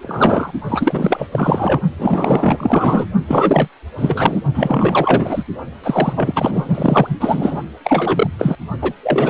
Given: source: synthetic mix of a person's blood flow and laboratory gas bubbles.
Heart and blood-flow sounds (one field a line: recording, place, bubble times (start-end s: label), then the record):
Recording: Doppler ultrasound of blood flow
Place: precordium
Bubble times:
0.03-0.52 s: bubbles
0.68-1.27 s: bubbles
1.31-1.81 s: bubbles
1.99-3.06 s: bubbles
3.27-3.68 s: bubbles
3.98-4.42 s: bubbles
4.54-5.44 s: bubbles
5.83-6.13 s: bubbles
6.16-7.08 s: bubbles
7.20-7.62 s: bubbles
7.84-8.27 s: bubbles
8.38-8.56 s: bubbles
8.81-8.93 s: bubbles
9.02-9.29 s: bubbles
From the record:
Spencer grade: 4 (maximum detectable bubble signal sounding continuously throughout systole and diastole of every cardiac period, and overriding the amplitude of the normal cardiac signals)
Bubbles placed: only in the low amplitude regions of the cardiac cycle